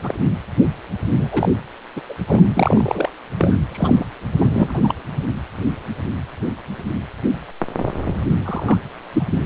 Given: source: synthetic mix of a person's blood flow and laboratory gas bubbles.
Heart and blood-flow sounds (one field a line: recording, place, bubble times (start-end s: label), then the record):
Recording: Doppler ultrasound of blood flow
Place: precordium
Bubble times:
0.00-0.14 s: bubbles
0.98-1.55 s: bubbles
1.96-2.01 s: bubbles
2.09-2.14 s: bubbles
2.28-2.41 s: bubbles
2.54-3.09 s: bubbles
3.40-3.59 s: bubbles
3.71-4.06 s: bubbles
4.35-4.81 s: bubbles
4.83-4.95 s: bubbles
8.44-8.79 s: bubbles
9.12-9.23 s: bubbles
9.33-9.46 s: bubbles
From the record:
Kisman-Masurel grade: 232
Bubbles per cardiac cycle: several, 3 to 8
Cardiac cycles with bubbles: 50 to 99%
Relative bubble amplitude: moderate (0.250 to 0.450)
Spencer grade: 3 (all of the cardiac periods contain showers or single bubble signals, but not dominating or overriding the cardiac motion signals)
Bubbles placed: anywhere in the cardiac cycle